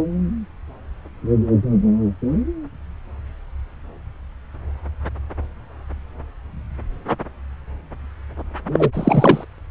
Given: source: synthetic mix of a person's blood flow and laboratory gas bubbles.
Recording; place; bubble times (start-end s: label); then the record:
Doppler ultrasound of blood flow; subclavian vein
8.72-8.89 s: bubbles
8.93-9.45 s: bubbles
From the record:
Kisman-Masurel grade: 213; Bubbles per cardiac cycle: several, 3 to 8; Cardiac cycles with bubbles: 1 to 10%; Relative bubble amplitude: loud (0.450 to 0.775); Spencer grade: 1 (occasional bubble signal discernible with the cardiac motion signal, with majority of cardiac periods free of bubbles); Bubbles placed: anywhere in the cardiac cycle